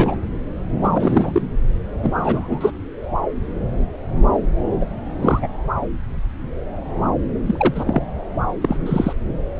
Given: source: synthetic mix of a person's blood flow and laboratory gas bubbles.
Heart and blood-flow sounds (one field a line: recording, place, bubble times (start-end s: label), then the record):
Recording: Doppler ultrasound of blood flow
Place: subclavian vein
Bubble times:
0.00-0.16 s: bubbles
0.81-1.42 s: bubbles
2.03-2.71 s: bubbles
4.80-4.85 s: bubbles
5.22-5.47 s: bubbles
7.46-8.02 s: bubbles
8.61-8.77 s: bubbles
8.86-9.13 s: bubbles
From the record:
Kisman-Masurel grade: 232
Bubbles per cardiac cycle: several, 3 to 8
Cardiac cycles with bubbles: 50 to 99%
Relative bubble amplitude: moderate (0.250 to 0.450)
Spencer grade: 3 (all of the cardiac periods contain showers or single bubble signals, but not dominating or overriding the cardiac motion signals)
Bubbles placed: anywhere in the cardiac cycle